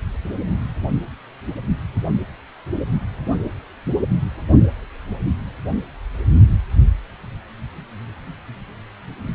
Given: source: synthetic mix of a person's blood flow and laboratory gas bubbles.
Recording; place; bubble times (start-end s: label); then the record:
Doppler ultrasound of blood flow; precordium
no bubbles
From the record:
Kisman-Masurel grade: 000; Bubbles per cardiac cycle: 0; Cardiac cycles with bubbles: 0%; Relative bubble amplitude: no bubbles discernible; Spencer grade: 0 (complete lack of bubble signals)